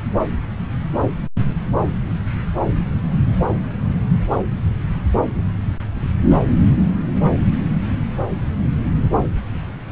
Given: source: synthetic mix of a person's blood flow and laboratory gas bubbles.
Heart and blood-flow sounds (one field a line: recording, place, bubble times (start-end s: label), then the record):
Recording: Doppler ultrasound of blood flow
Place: subclavian vein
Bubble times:
no bubbles
From the record:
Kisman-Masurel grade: 000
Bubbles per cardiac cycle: 0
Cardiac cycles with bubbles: 0%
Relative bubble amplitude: no bubbles discernible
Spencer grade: 0 (complete lack of bubble signals)